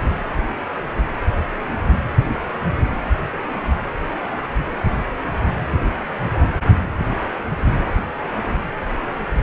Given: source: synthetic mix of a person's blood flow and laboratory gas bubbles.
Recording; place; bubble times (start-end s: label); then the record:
Doppler ultrasound of blood flow; precordium
7.84-8.00 s: bubbles
From the record:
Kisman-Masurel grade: 111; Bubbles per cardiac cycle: 1 to 2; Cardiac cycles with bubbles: 1 to 10%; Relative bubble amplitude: barely perceptible (0.100 to 0.250); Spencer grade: 1 (occasional bubble signal discernible with the cardiac motion signal, with majority of cardiac periods free of bubbles); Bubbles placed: anywhere in the cardiac cycle